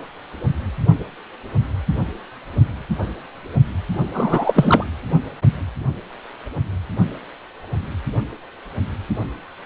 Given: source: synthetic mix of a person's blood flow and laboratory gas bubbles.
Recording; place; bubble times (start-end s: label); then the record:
Doppler ultrasound of blood flow; precordium
4.14-4.84 s: bubbles
From the record:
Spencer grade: 2 (many but less than half of the cardiac periods contain bubble signals, singularly or in groups); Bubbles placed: anywhere in the cardiac cycle